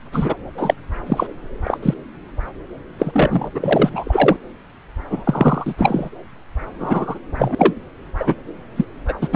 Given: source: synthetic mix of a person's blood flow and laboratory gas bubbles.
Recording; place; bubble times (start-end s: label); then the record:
Doppler ultrasound of blood flow; subclavian vein
0.12-0.34 s: bubbles
0.57-0.74 s: bubbles
1.07-1.27 s: bubbles
1.64-1.78 s: bubbles
1.82-1.94 s: bubbles
2.99-3.50 s: bubbles
3.54-4.38 s: bubbles
5.10-5.22 s: bubbles
5.25-5.74 s: bubbles
5.78-6.10 s: bubbles
6.79-7.19 s: bubbles
7.38-7.55 s: bubbles
7.58-7.75 s: bubbles
8.18-8.35 s: bubbles
8.76-8.85 s: bubbles
9.08-9.13 s: bubbles
9.21-9.28 s: bubbles
9.32-9.36 s: bubbles
From the record:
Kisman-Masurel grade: 243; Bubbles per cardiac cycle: several, 3 to 8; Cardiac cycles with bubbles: 100%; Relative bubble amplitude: loud (0.450 to 0.775); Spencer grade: 3 (all of the cardiac periods contain showers or single bubble signals, but not dominating or overriding the cardiac motion signals); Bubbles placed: anywhere in the cardiac cycle